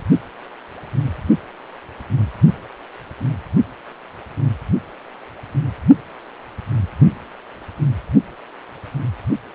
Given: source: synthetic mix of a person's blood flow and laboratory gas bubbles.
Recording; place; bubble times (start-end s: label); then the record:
Doppler ultrasound of blood flow; precordium
no bubbles
From the record:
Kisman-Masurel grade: 000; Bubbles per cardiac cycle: 0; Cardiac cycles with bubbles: 0%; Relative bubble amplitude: no bubbles discernible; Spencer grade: 0 (complete lack of bubble signals)